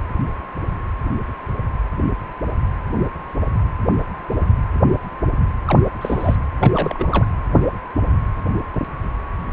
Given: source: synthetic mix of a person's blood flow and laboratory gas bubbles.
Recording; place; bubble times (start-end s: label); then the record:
Doppler ultrasound of blood flow; precordium
5.65-5.80 s: bubbles
6.01-6.36 s: bubbles
6.60-7.25 s: bubbles
From the record:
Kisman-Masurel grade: 222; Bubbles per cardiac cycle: several, 3 to 8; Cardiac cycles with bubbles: 10 to 50%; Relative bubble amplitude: moderate (0.250 to 0.450); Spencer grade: 2 (many but less than half of the cardiac periods contain bubble signals, singularly or in groups); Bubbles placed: anywhere in the cardiac cycle